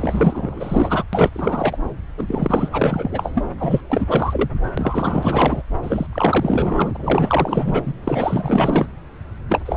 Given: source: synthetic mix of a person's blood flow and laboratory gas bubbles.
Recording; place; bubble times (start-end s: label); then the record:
Doppler ultrasound of blood flow; subclavian vein
0.00-1.03 s: bubbles
1.13-1.77 s: bubbles
2.18-2.69 s: bubbles
2.72-3.46 s: bubbles
3.59-3.81 s: bubbles
3.90-4.49 s: bubbles
4.77-5.62 s: bubbles
5.83-6.06 s: bubbles
6.12-7.92 s: bubbles
8.04-8.87 s: bubbles
9.49-9.61 s: bubbles
9.66-9.77 s: bubbles
From the record:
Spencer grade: 4 (maximum detectable bubble signal sounding continuously throughout systole and diastole of every cardiac period, and overriding the amplitude of the normal cardiac signals); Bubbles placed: anywhere in the cardiac cycle